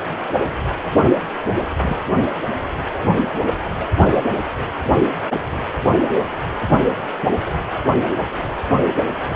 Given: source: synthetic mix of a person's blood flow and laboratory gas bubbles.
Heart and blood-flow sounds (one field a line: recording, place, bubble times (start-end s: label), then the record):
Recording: Doppler ultrasound of blood flow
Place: precordium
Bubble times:
1.81-1.98 s: bubbles
From the record:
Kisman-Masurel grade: 111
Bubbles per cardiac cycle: 1 to 2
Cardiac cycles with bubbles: 1 to 10%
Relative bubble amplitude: barely perceptible (0.100 to 0.250)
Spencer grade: 1 (occasional bubble signal discernible with the cardiac motion signal, with majority of cardiac periods free of bubbles)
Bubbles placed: anywhere in the cardiac cycle